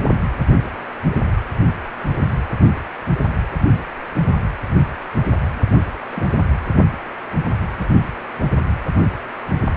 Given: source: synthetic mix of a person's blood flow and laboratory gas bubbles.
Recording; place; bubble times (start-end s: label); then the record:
Doppler ultrasound of blood flow; precordium
0.04-0.10 s: bubbles
5.16-5.21 s: bubbles
6.10-6.41 s: bubbles
7.79-7.86 s: bubbles
From the record:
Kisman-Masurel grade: 121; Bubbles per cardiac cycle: 1 to 2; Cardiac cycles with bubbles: 10 to 50%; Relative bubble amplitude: barely perceptible (0.100 to 0.250); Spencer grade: 2 (many but less than half of the cardiac periods contain bubble signals, singularly or in groups); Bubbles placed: anywhere in the cardiac cycle